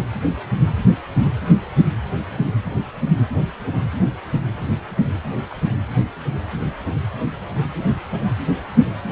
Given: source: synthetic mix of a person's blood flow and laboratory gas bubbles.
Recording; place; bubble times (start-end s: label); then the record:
Doppler ultrasound of blood flow; precordium
5.50-5.76 s: bubbles
From the record:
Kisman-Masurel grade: 111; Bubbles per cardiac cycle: 1 to 2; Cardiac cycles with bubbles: 1 to 10%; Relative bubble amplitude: barely perceptible (0.100 to 0.250); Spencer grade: 1 (occasional bubble signal discernible with the cardiac motion signal, with majority of cardiac periods free of bubbles); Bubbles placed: anywhere in the cardiac cycle